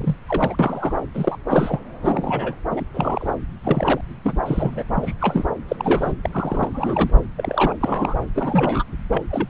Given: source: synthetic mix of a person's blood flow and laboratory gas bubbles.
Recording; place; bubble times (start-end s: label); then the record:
Doppler ultrasound of blood flow; subclavian vein
0.00-0.16 s: bubbles
0.29-0.55 s: bubbles
0.59-0.93 s: bubbles
1.14-1.39 s: bubbles
1.48-1.80 s: bubbles
2.02-2.55 s: bubbles
2.70-2.85 s: bubbles
2.94-3.33 s: bubbles
3.64-4.01 s: bubbles
4.24-4.39 s: bubbles
4.46-4.83 s: bubbles
4.95-5.13 s: bubbles
5.21-5.45 s: bubbles
5.68-5.76 s: bubbles
5.79-6.13 s: bubbles
6.24-6.29 s: bubbles
6.33-7.10 s: bubbles
7.37-7.76 s: bubbles
7.80-8.14 s: bubbles
8.35-8.84 s: bubbles
9.12-9.21 s: bubbles
9.29-9.50 s: bubbles
From the record:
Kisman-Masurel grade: 242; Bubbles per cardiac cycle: several, 3 to 8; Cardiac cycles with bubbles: 100%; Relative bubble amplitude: moderate (0.250 to 0.450); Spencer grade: 3 (all of the cardiac periods contain showers or single bubble signals, but not dominating or overriding the cardiac motion signals); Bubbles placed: anywhere in the cardiac cycle